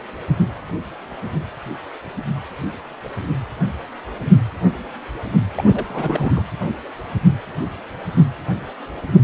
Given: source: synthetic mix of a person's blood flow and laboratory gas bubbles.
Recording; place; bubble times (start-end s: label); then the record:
Doppler ultrasound of blood flow; precordium
5.56-5.85 s: bubbles
5.88-6.42 s: bubbles
From the record:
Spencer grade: 2 (many but less than half of the cardiac periods contain bubble signals, singularly or in groups); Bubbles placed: anywhere in the cardiac cycle